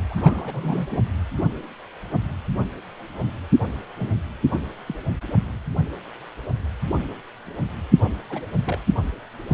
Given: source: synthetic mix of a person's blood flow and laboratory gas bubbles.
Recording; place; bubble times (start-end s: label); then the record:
Doppler ultrasound of blood flow; precordium
0.10-0.87 s: bubbles
0.91-0.99 s: bubbles
3.99-4.20 s: bubbles
4.52-4.60 s: bubbles
4.87-4.95 s: bubbles
8.04-8.09 s: bubbles
8.29-8.41 s: bubbles
8.66-8.79 s: bubbles
From the record:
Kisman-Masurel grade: 221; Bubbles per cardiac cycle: several, 3 to 8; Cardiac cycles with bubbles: 10 to 50%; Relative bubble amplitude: barely perceptible (0.100 to 0.250); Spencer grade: 2 (many but less than half of the cardiac periods contain bubble signals, singularly or in groups); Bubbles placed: anywhere in the cardiac cycle